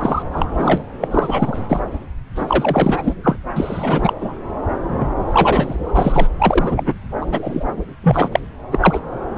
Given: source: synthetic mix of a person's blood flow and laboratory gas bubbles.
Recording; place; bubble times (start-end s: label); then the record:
Doppler ultrasound of blood flow; subclavian vein
0.00-0.23 s: bubbles
0.33-0.81 s: bubbles
1.00-1.08 s: bubbles
1.10-1.59 s: bubbles
1.69-1.82 s: bubbles
2.35-3.13 s: bubbles
3.23-3.37 s: bubbles
3.56-4.13 s: bubbles
4.21-4.32 s: bubbles
4.87-5.14 s: bubbles
5.28-5.77 s: bubbles
5.83-6.28 s: bubbles
6.39-6.83 s: bubbles
6.86-6.95 s: bubbles
7.21-7.26 s: bubbles
7.31-7.64 s: bubbles
8.03-8.39 s: bubbles
8.71-9.00 s: bubbles
From the record:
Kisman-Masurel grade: 343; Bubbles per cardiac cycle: rolling drumbeat, 9 or more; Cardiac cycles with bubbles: 100%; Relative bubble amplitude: loud (0.450 to 0.775); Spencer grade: 3 (all of the cardiac periods contain showers or single bubble signals, but not dominating or overriding the cardiac motion signals); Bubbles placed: anywhere in the cardiac cycle